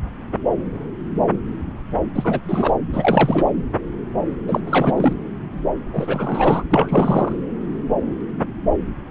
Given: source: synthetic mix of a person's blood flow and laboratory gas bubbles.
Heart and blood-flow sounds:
Doppler ultrasound of blood flow; subclavian vein
2.15-2.40 s: bubbles
2.45-2.74 s: bubbles
2.92-3.52 s: bubbles
4.47-4.60 s: bubbles
4.66-5.13 s: bubbles
5.92-6.63 s: bubbles
6.71-7.32 s: bubbles
From the record:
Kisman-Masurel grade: 333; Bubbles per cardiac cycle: rolling drumbeat, 9 or more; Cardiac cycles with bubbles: 50 to 99%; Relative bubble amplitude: loud (0.450 to 0.775); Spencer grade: 3 (all of the cardiac periods contain showers or single bubble signals, but not dominating or overriding the cardiac motion signals); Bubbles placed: anywhere in the cardiac cycle

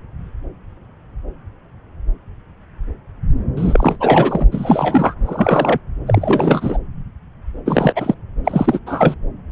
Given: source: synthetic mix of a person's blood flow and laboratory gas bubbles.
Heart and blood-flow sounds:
Doppler ultrasound of blood flow; subclavian vein
3.56-4.45 s: bubbles
4.51-5.14 s: bubbles
5.25-5.79 s: bubbles
6.06-6.78 s: bubbles
7.66-7.93 s: bubbles
7.96-8.14 s: bubbles
8.45-8.79 s: bubbles
8.86-9.14 s: bubbles
From the record:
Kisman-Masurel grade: 333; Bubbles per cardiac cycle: rolling drumbeat, 9 or more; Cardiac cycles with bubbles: 50 to 99%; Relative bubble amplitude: loud (0.450 to 0.775); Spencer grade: 3 (all of the cardiac periods contain showers or single bubble signals, but not dominating or overriding the cardiac motion signals); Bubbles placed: anywhere in the cardiac cycle

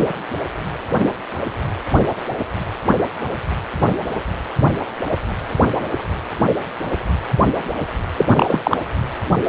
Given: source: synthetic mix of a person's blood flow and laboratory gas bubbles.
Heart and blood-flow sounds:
Doppler ultrasound of blood flow; precordium
8.18-8.26 s: bubbles
8.35-8.61 s: bubbles
8.64-8.77 s: bubbles
From the record:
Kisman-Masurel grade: 213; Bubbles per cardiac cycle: several, 3 to 8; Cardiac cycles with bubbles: 1 to 10%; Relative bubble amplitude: loud (0.450 to 0.775); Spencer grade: 1 (occasional bubble signal discernible with the cardiac motion signal, with majority of cardiac periods free of bubbles); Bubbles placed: anywhere in the cardiac cycle

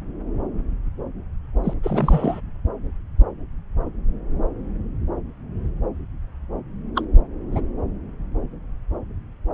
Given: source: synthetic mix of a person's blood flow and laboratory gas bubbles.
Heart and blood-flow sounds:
Doppler ultrasound of blood flow; subclavian vein
1.63-1.73 s: bubbles
1.83-2.41 s: bubbles
6.95-7.04 s: bubbles
7.52-7.62 s: bubbles
From the record:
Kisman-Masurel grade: 222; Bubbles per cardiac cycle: several, 3 to 8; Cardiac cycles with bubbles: 10 to 50%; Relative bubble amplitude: moderate (0.250 to 0.450); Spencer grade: 2 (many but less than half of the cardiac periods contain bubble signals, singularly or in groups); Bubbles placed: anywhere in the cardiac cycle

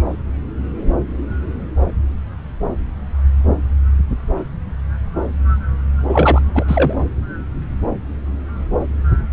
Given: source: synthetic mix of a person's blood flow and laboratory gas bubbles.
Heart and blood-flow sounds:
Doppler ultrasound of blood flow; subclavian vein
6.08-6.64 s: bubbles
6.67-6.93 s: bubbles
From the record:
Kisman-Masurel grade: 213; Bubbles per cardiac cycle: several, 3 to 8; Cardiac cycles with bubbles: 1 to 10%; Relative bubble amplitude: loud (0.450 to 0.775); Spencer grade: 1 (occasional bubble signal discernible with the cardiac motion signal, with majority of cardiac periods free of bubbles); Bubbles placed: anywhere in the cardiac cycle

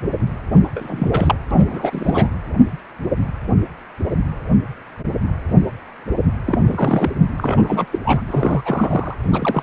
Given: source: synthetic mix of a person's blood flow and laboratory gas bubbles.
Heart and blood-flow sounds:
Doppler ultrasound of blood flow; precordium
0.64-1.08 s: bubbles
1.10-1.35 s: bubbles
1.50-2.27 s: bubbles
6.46-7.11 s: bubbles
7.37-7.86 s: bubbles
7.92-7.99 s: bubbles
8.04-8.21 s: bubbles
8.27-8.62 s: bubbles
8.65-9.14 s: bubbles
9.23-9.62 s: bubbles
From the record:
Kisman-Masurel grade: 332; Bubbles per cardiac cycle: rolling drumbeat, 9 or more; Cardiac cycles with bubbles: 50 to 99%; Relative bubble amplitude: moderate (0.250 to 0.450); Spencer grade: 3 (all of the cardiac periods contain showers or single bubble signals, but not dominating or overriding the cardiac motion signals); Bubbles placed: anywhere in the cardiac cycle

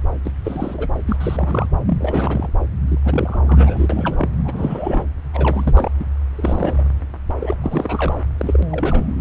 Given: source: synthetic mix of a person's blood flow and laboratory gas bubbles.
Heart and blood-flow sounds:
Doppler ultrasound of blood flow; subclavian vein
0.25-0.31 s: bubbles
0.44-0.89 s: bubbles
1.06-1.17 s: bubbles
1.20-1.69 s: bubbles
1.86-2.49 s: bubbles
2.88-2.99 s: bubbles
3.04-4.29 s: bubbles
4.45-5.04 s: bubbles
5.33-5.91 s: bubbles
6.00-6.04 s: bubbles
6.36-6.83 s: bubbles
7.41-7.56 s: bubbles
7.61-8.18 s: bubbles
8.38-8.64 s: bubbles
8.71-9.12 s: bubbles
From the record:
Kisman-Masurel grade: 332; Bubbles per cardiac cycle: rolling drumbeat, 9 or more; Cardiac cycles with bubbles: 50 to 99%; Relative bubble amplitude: moderate (0.250 to 0.450); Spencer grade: 3 (all of the cardiac periods contain showers or single bubble signals, but not dominating or overriding the cardiac motion signals); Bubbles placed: anywhere in the cardiac cycle

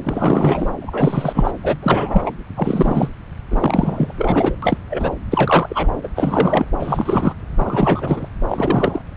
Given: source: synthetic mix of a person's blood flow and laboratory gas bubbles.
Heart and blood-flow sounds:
Doppler ultrasound of blood flow; subclavian vein
0.03-0.71 s: bubbles
0.81-1.51 s: bubbles
1.63-1.78 s: bubbles
1.82-2.30 s: bubbles
2.55-3.09 s: bubbles
3.50-4.55 s: bubbles
4.62-4.77 s: bubbles
4.89-5.10 s: bubbles
5.30-5.89 s: bubbles
6.03-6.08 s: bubbles
6.15-6.66 s: bubbles
6.79-7.33 s: bubbles
7.57-8.29 s: bubbles
8.48-9.02 s: bubbles
From the record:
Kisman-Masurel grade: 343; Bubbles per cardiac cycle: rolling drumbeat, 9 or more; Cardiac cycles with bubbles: 100%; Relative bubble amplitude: loud (0.450 to 0.775); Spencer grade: 3 (all of the cardiac periods contain showers or single bubble signals, but not dominating or overriding the cardiac motion signals); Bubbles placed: anywhere in the cardiac cycle

